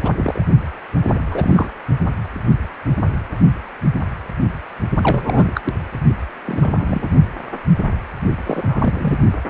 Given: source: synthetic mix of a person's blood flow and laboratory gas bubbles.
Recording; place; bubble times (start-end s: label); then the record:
Doppler ultrasound of blood flow; precordium
0.02-0.12 s: bubbles
0.17-0.45 s: bubbles
1.07-1.19 s: bubbles
1.25-1.70 s: bubbles
4.96-5.52 s: bubbles
5.54-5.61 s: bubbles
5.65-5.74 s: bubbles
6.46-7.08 s: bubbles
8.46-9.18 s: bubbles
From the record:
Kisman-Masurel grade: 232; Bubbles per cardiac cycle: several, 3 to 8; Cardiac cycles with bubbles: 50 to 99%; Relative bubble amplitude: moderate (0.250 to 0.450); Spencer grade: 3 (all of the cardiac periods contain showers or single bubble signals, but not dominating or overriding the cardiac motion signals); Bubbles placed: only in the low amplitude regions of the cardiac cycle